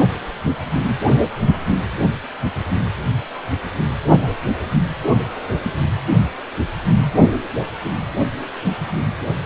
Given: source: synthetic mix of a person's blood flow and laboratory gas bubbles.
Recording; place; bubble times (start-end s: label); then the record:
Doppler ultrasound of blood flow; precordium
7.02-7.06 s: bubbles
7.83-7.99 s: bubbles
From the record:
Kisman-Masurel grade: 111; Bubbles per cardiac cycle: 1 to 2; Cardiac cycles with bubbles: 1 to 10%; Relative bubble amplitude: barely perceptible (0.100 to 0.250); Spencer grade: 1 (occasional bubble signal discernible with the cardiac motion signal, with majority of cardiac periods free of bubbles); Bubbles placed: anywhere in the cardiac cycle